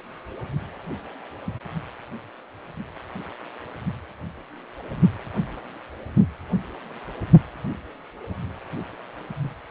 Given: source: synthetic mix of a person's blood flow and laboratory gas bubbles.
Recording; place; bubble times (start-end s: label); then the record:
Doppler ultrasound of blood flow; precordium
9.43-9.49 s: bubbles
From the record:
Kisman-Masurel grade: 221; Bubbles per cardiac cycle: several, 3 to 8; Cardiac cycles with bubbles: 10 to 50%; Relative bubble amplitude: barely perceptible (0.100 to 0.250); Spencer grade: 2 (many but less than half of the cardiac periods contain bubble signals, singularly or in groups); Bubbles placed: anywhere in the cardiac cycle